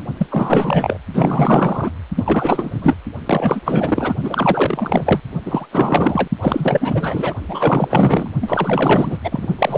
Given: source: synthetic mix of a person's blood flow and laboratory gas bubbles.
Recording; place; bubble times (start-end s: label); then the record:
Doppler ultrasound of blood flow; precordium
0.18-0.26 s: bubbles
0.31-0.97 s: bubbles
1.14-1.90 s: bubbles
2.16-2.95 s: bubbles
3.26-3.61 s: bubbles
3.65-4.15 s: bubbles
4.23-5.20 s: bubbles
5.45-5.66 s: bubbles
5.71-6.28 s: bubbles
6.41-7.35 s: bubbles
7.48-8.29 s: bubbles
8.42-9.18 s: bubbles
9.24-9.47 s: bubbles
9.59-9.78 s: bubbles
From the record:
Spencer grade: 4 (maximum detectable bubble signal sounding continuously throughout systole and diastole of every cardiac period, and overriding the amplitude of the normal cardiac signals); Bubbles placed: only in the low amplitude regions of the cardiac cycle